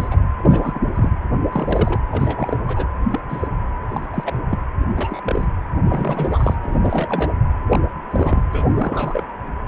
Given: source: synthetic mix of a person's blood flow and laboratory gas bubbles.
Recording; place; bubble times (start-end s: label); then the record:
Doppler ultrasound of blood flow; precordium
0.00-0.08 s: bubbles
0.11-0.17 s: bubbles
0.39-0.80 s: bubbles
0.95-1.10 s: bubbles
1.52-2.00 s: bubbles
2.11-2.57 s: bubbles
2.66-2.87 s: bubbles
3.10-3.20 s: bubbles
3.29-3.48 s: bubbles
3.88-4.06 s: bubbles
4.12-4.43 s: bubbles
4.50-4.59 s: bubbles
4.96-5.45 s: bubbles
5.88-6.55 s: bubbles
6.62-6.79 s: bubbles
6.81-7.33 s: bubbles
7.70-7.81 s: bubbles
8.11-8.43 s: bubbles
8.53-9.24 s: bubbles
From the record:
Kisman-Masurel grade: 242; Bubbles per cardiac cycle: several, 3 to 8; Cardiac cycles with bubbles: 100%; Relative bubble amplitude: moderate (0.250 to 0.450); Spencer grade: 3 (all of the cardiac periods contain showers or single bubble signals, but not dominating or overriding the cardiac motion signals); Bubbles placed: anywhere in the cardiac cycle